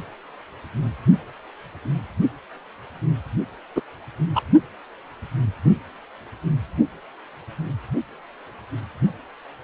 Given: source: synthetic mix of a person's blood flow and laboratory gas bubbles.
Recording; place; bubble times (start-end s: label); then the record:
Doppler ultrasound of blood flow; precordium
3.75-3.81 s: bubbles
4.35-4.42 s: bubbles
From the record:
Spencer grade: 2 (many but less than half of the cardiac periods contain bubble signals, singularly or in groups); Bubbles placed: only in the low amplitude regions of the cardiac cycle